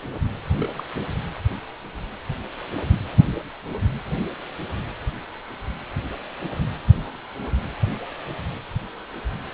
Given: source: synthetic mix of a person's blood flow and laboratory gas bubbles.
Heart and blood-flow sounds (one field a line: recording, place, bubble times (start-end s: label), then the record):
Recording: Doppler ultrasound of blood flow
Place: precordium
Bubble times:
0.58-0.69 s: bubbles
0.77-0.83 s: bubbles
From the record:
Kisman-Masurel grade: 111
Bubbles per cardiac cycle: 1 to 2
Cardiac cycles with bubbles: 1 to 10%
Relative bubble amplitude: barely perceptible (0.100 to 0.250)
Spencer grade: 1 (occasional bubble signal discernible with the cardiac motion signal, with majority of cardiac periods free of bubbles)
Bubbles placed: anywhere in the cardiac cycle